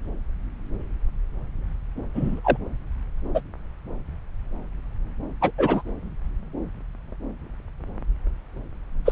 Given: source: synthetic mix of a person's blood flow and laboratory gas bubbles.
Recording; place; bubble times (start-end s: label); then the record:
Doppler ultrasound of blood flow; subclavian vein
2.15-2.41 s: bubbles
2.44-2.58 s: bubbles
3.35-3.41 s: bubbles
5.41-5.51 s: bubbles
5.58-5.82 s: bubbles
9.05-9.12 s: bubbles
From the record:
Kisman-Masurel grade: 222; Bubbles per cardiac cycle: several, 3 to 8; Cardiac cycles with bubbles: 10 to 50%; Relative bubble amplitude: moderate (0.250 to 0.450); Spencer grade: 2 (many but less than half of the cardiac periods contain bubble signals, singularly or in groups); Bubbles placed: anywhere in the cardiac cycle